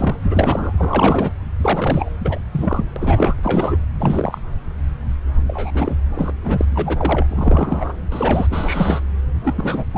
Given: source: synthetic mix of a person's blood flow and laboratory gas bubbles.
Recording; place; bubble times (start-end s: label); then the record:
Doppler ultrasound of blood flow; subclavian vein
0.00-0.19 s: bubbles
0.22-0.73 s: bubbles
0.77-1.31 s: bubbles
1.61-2.10 s: bubbles
2.20-2.40 s: bubbles
2.52-2.85 s: bubbles
2.96-3.35 s: bubbles
3.42-3.82 s: bubbles
4.00-4.41 s: bubbles
5.48-5.71 s: bubbles
5.74-5.96 s: bubbles
6.16-6.33 s: bubbles
6.44-7.94 s: bubbles
8.12-8.47 s: bubbles
8.51-9.00 s: bubbles
9.44-9.84 s: bubbles
9.94-9.98 s: bubbles
From the record:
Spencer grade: 3 (all of the cardiac periods contain showers or single bubble signals, but not dominating or overriding the cardiac motion signals); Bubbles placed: anywhere in the cardiac cycle